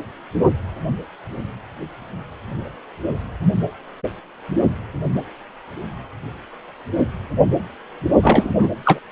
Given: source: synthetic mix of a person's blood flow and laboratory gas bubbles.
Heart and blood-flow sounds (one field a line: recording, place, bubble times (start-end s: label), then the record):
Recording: Doppler ultrasound of blood flow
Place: precordium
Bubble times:
8.21-8.68 s: bubbles
8.85-8.99 s: bubbles
From the record:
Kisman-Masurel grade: 213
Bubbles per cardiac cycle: several, 3 to 8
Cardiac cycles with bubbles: 1 to 10%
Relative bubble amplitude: loud (0.450 to 0.775)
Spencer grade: 1 (occasional bubble signal discernible with the cardiac motion signal, with majority of cardiac periods free of bubbles)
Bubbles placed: only in the low amplitude regions of the cardiac cycle